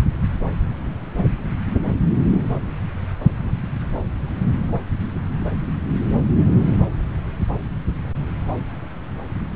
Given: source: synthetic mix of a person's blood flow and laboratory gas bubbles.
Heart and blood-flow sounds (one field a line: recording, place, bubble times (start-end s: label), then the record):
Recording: Doppler ultrasound of blood flow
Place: subclavian vein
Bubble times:
no bubbles
From the record:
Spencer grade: 0 (complete lack of bubble signals)